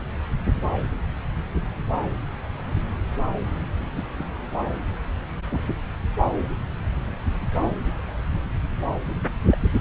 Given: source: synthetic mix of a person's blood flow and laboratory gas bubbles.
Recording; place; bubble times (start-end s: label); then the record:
Doppler ultrasound of blood flow; subclavian vein
2.04-2.09 s: bubbles
2.63-2.80 s: bubbles
3.94-4.05 s: bubbles
4.18-4.25 s: bubbles
5.50-5.67 s: bubbles
9.52-9.57 s: bubbles
From the record:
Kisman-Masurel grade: 121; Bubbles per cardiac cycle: 1 to 2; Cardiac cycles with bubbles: 10 to 50%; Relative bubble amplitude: barely perceptible (0.100 to 0.250); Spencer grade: 2 (many but less than half of the cardiac periods contain bubble signals, singularly or in groups); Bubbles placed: anywhere in the cardiac cycle